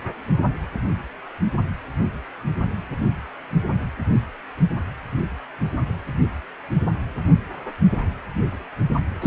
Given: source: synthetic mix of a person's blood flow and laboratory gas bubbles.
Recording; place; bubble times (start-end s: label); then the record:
Doppler ultrasound of blood flow; precordium
9.21-9.27 s: bubbles
From the record:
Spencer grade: 1 (occasional bubble signal discernible with the cardiac motion signal, with majority of cardiac periods free of bubbles); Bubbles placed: anywhere in the cardiac cycle